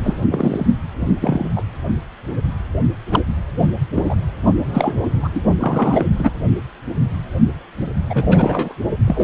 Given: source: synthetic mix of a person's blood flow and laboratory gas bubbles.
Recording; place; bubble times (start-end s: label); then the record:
Doppler ultrasound of blood flow; precordium
0.00-0.18 s: bubbles
0.31-0.66 s: bubbles
0.99-1.15 s: bubbles
1.21-1.49 s: bubbles
1.56-1.64 s: bubbles
3.11-3.23 s: bubbles
3.59-3.70 s: bubbles
3.95-4.16 s: bubbles
4.74-4.94 s: bubbles
5.22-5.29 s: bubbles
5.35-5.41 s: bubbles
5.60-6.09 s: bubbles
6.19-6.32 s: bubbles
8.10-8.74 s: bubbles
9.07-9.23 s: bubbles
From the record:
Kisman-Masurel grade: 233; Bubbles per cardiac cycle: several, 3 to 8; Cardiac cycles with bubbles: 50 to 99%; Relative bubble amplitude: loud (0.450 to 0.775); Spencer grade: 3 (all of the cardiac periods contain showers or single bubble signals, but not dominating or overriding the cardiac motion signals); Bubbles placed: only in the low amplitude regions of the cardiac cycle